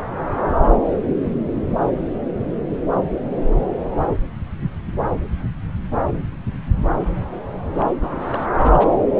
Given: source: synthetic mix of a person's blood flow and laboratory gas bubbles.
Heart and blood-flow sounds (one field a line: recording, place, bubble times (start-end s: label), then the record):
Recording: Doppler ultrasound of blood flow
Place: subclavian vein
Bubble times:
7.70-7.87 s: bubbles
8.01-8.48 s: bubbles
8.53-8.87 s: bubbles
From the record:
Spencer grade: 2 (many but less than half of the cardiac periods contain bubble signals, singularly or in groups)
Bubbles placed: anywhere in the cardiac cycle